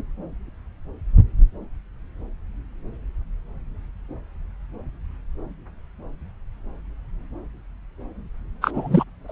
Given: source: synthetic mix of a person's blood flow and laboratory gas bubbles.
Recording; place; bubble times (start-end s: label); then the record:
Doppler ultrasound of blood flow; subclavian vein
8.62-9.04 s: bubbles
9.28-9.32 s: bubbles
From the record:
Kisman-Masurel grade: 222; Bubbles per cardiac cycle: several, 3 to 8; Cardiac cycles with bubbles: 10 to 50%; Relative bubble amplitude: moderate (0.250 to 0.450); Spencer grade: 2 (many but less than half of the cardiac periods contain bubble signals, singularly or in groups); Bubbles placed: anywhere in the cardiac cycle